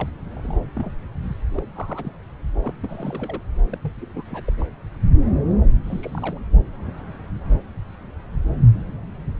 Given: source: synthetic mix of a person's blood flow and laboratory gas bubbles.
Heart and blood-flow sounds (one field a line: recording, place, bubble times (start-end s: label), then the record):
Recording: Doppler ultrasound of blood flow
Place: subclavian vein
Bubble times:
0.00-0.09 s: bubbles
0.34-0.60 s: bubbles
0.75-0.96 s: bubbles
1.55-1.63 s: bubbles
1.71-2.12 s: bubbles
2.61-2.73 s: bubbles
2.83-3.42 s: bubbles
3.69-3.77 s: bubbles
3.82-3.93 s: bubbles
4.01-4.23 s: bubbles
4.26-4.43 s: bubbles
4.47-4.53 s: bubbles
4.59-4.66 s: bubbles
5.83-6.40 s: bubbles
From the record:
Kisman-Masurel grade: 221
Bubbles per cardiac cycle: several, 3 to 8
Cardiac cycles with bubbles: 10 to 50%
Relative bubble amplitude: barely perceptible (0.100 to 0.250)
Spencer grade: 2 (many but less than half of the cardiac periods contain bubble signals, singularly or in groups)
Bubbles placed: anywhere in the cardiac cycle